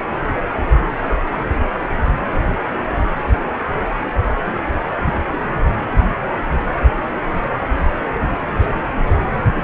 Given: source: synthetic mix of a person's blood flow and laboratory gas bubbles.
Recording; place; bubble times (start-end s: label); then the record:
Doppler ultrasound of blood flow; precordium
8.58-8.83 s: bubbles
From the record:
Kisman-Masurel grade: 111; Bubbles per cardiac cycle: 1 to 2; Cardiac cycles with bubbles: 1 to 10%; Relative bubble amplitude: barely perceptible (0.100 to 0.250); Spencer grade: 1 (occasional bubble signal discernible with the cardiac motion signal, with majority of cardiac periods free of bubbles); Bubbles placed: anywhere in the cardiac cycle